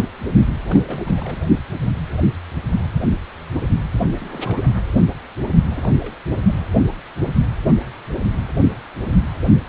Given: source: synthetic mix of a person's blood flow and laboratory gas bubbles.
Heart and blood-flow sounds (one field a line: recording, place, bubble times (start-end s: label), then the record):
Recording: Doppler ultrasound of blood flow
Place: precordium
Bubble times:
0.65-1.03 s: bubbles
1.06-1.43 s: bubbles
3.93-4.06 s: bubbles
4.13-4.61 s: bubbles
5.69-5.93 s: bubbles
5.99-6.15 s: bubbles
6.28-6.36 s: bubbles
6.47-6.51 s: bubbles
From the record:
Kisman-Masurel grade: 221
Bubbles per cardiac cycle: several, 3 to 8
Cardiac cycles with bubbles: 10 to 50%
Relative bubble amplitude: barely perceptible (0.100 to 0.250)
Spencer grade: 2 (many but less than half of the cardiac periods contain bubble signals, singularly or in groups)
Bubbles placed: only in the low amplitude regions of the cardiac cycle